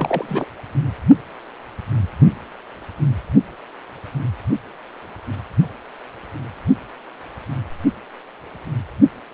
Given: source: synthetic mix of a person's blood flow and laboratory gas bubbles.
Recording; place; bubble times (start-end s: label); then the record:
Doppler ultrasound of blood flow; precordium
0.00-0.46 s: bubbles
From the record:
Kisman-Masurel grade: 212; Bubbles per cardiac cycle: several, 3 to 8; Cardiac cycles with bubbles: 1 to 10%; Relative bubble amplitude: moderate (0.250 to 0.450); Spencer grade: 1 (occasional bubble signal discernible with the cardiac motion signal, with majority of cardiac periods free of bubbles); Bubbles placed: anywhere in the cardiac cycle